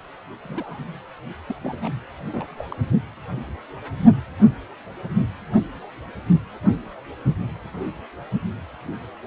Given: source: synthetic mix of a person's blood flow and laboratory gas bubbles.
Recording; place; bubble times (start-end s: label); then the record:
Doppler ultrasound of blood flow; precordium
0.44-0.84 s: bubbles
1.48-1.55 s: bubbles
1.61-1.89 s: bubbles
2.29-2.54 s: bubbles
2.58-2.65 s: bubbles
2.71-2.83 s: bubbles
From the record:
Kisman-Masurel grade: 221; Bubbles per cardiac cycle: several, 3 to 8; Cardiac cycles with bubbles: 10 to 50%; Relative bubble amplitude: barely perceptible (0.100 to 0.250); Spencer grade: 2 (many but less than half of the cardiac periods contain bubble signals, singularly or in groups); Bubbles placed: only in the low amplitude regions of the cardiac cycle